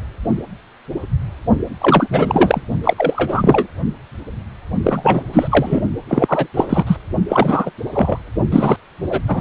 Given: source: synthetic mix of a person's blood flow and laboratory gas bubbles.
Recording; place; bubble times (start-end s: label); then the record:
Doppler ultrasound of blood flow; precordium
1.80-2.61 s: bubbles
2.83-2.93 s: bubbles
2.96-3.67 s: bubbles
4.83-5.23 s: bubbles
5.33-5.81 s: bubbles
6.08-6.47 s: bubbles
6.54-6.96 s: bubbles
7.29-7.71 s: bubbles
7.93-8.19 s: bubbles
8.51-8.77 s: bubbles
9.09-9.22 s: bubbles
9.28-9.41 s: bubbles
From the record:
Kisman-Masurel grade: 333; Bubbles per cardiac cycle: rolling drumbeat, 9 or more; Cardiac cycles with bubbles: 50 to 99%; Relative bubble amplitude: loud (0.450 to 0.775); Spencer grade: 3 (all of the cardiac periods contain showers or single bubble signals, but not dominating or overriding the cardiac motion signals); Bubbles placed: only in the low amplitude regions of the cardiac cycle